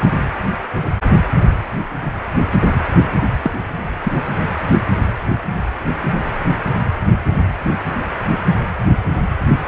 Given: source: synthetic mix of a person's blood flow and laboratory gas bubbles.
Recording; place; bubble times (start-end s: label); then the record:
Doppler ultrasound of blood flow; precordium
3.43-3.51 s: bubbles
4.03-4.12 s: bubbles
From the record:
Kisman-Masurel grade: 112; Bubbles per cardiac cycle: 1 to 2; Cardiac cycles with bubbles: 1 to 10%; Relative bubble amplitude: moderate (0.250 to 0.450); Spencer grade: 1 (occasional bubble signal discernible with the cardiac motion signal, with majority of cardiac periods free of bubbles); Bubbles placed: anywhere in the cardiac cycle